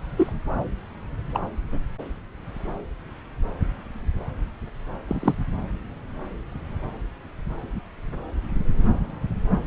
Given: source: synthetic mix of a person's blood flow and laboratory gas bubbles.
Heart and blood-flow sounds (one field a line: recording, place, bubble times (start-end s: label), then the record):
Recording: Doppler ultrasound of blood flow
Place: subclavian vein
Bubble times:
0.16-0.33 s: bubbles
1.34-1.41 s: bubbles
1.72-1.78 s: bubbles
5.07-5.35 s: bubbles
From the record:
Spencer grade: 2 (many but less than half of the cardiac periods contain bubble signals, singularly or in groups)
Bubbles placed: anywhere in the cardiac cycle